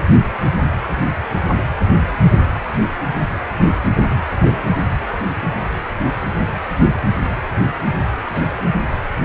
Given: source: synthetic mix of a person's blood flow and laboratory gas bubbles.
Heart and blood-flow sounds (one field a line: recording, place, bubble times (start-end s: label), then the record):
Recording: Doppler ultrasound of blood flow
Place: precordium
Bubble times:
4.29-4.53 s: bubbles
8.32-8.43 s: bubbles
8.50-8.63 s: bubbles
From the record:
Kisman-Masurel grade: 121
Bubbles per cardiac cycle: 1 to 2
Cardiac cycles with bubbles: 10 to 50%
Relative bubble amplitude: barely perceptible (0.100 to 0.250)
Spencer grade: 2 (many but less than half of the cardiac periods contain bubble signals, singularly or in groups)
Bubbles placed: anywhere in the cardiac cycle